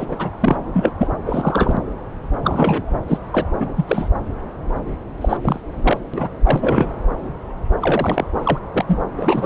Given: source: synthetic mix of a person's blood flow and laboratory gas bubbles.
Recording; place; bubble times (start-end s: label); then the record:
Doppler ultrasound of blood flow; subclavian vein
0.00-0.05 s: bubbles
0.08-0.30 s: bubbles
0.40-0.57 s: bubbles
0.73-0.92 s: bubbles
0.98-1.08 s: bubbles
1.26-1.77 s: bubbles
2.44-2.97 s: bubbles
3.08-3.18 s: bubbles
3.32-3.47 s: bubbles
3.59-3.69 s: bubbles
3.76-4.09 s: bubbles
5.21-5.37 s: bubbles
5.42-5.59 s: bubbles
5.83-5.97 s: bubbles
6.13-6.29 s: bubbles
6.45-6.87 s: bubbles
7.80-8.27 s: bubbles
8.44-8.59 s: bubbles
8.72-8.99 s: bubbles
9.17-9.46 s: bubbles
From the record:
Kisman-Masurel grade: 232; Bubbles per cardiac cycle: several, 3 to 8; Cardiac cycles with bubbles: 50 to 99%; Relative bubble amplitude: moderate (0.250 to 0.450); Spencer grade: 3 (all of the cardiac periods contain showers or single bubble signals, but not dominating or overriding the cardiac motion signals); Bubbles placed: anywhere in the cardiac cycle